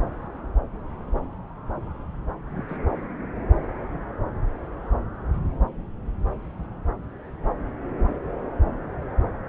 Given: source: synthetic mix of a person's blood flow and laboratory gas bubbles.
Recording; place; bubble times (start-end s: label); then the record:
Doppler ultrasound of blood flow; subclavian vein
2.54-2.63 s: bubbles
2.68-2.77 s: bubbles
From the record:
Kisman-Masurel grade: 111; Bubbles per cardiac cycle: 1 to 2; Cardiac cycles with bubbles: 1 to 10%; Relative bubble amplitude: barely perceptible (0.100 to 0.250); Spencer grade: 1 (occasional bubble signal discernible with the cardiac motion signal, with majority of cardiac periods free of bubbles); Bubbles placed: anywhere in the cardiac cycle